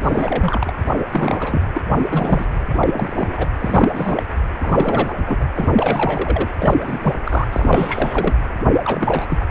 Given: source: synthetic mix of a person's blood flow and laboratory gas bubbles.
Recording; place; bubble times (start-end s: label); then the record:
Doppler ultrasound of blood flow; precordium
0.00-0.73 s: bubbles
0.86-0.90 s: bubbles
0.98-1.06 s: bubbles
1.10-1.66 s: bubbles
1.74-1.81 s: bubbles
1.92-2.47 s: bubbles
2.79-3.48 s: bubbles
3.60-4.23 s: bubbles
4.58-5.13 s: bubbles
5.26-5.44 s: bubbles
5.55-6.48 s: bubbles
6.59-7.14 s: bubbles
7.24-7.47 s: bubbles
7.51-8.34 s: bubbles
8.85-9.45 s: bubbles
From the record:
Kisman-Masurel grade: 342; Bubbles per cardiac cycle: rolling drumbeat, 9 or more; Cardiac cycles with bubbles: 100%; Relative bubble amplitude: moderate (0.250 to 0.450); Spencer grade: 3 (all of the cardiac periods contain showers or single bubble signals, but not dominating or overriding the cardiac motion signals); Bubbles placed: anywhere in the cardiac cycle